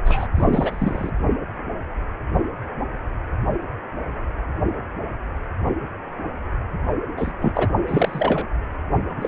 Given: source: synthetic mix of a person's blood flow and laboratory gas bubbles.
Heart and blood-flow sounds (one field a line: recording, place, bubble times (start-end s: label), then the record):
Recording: Doppler ultrasound of blood flow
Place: precordium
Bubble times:
0.05-0.27 s: bubbles
0.35-1.10 s: bubbles
7.17-7.33 s: bubbles
7.41-7.52 s: bubbles
7.55-7.67 s: bubbles
7.88-8.47 s: bubbles
9.08-9.28 s: bubbles
From the record:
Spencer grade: 2 (many but less than half of the cardiac periods contain bubble signals, singularly or in groups)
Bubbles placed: only in the low amplitude regions of the cardiac cycle